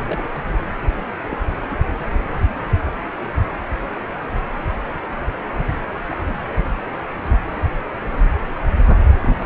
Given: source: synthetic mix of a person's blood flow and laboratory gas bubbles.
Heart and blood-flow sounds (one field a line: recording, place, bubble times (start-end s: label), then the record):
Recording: Doppler ultrasound of blood flow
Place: precordium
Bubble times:
0.06-0.23 s: bubbles
1.31-1.37 s: bubbles
1.70-1.78 s: bubbles
1.86-1.92 s: bubbles
6.08-6.17 s: bubbles
9.23-9.46 s: bubbles
From the record:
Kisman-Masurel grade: 121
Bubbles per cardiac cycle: 1 to 2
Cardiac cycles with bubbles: 10 to 50%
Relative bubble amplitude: barely perceptible (0.100 to 0.250)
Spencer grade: 2 (many but less than half of the cardiac periods contain bubble signals, singularly or in groups)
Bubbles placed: anywhere in the cardiac cycle